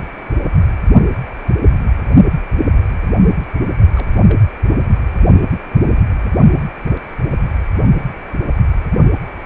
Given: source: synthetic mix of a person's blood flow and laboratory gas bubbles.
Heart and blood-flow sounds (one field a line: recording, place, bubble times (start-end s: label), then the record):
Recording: Doppler ultrasound of blood flow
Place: precordium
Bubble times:
3.94-4.07 s: bubbles
4.29-4.36 s: bubbles
From the record:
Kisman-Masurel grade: 111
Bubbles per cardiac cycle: 1 to 2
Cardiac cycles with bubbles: 1 to 10%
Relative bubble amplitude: barely perceptible (0.100 to 0.250)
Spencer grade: 1 (occasional bubble signal discernible with the cardiac motion signal, with majority of cardiac periods free of bubbles)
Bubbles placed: only in the low amplitude regions of the cardiac cycle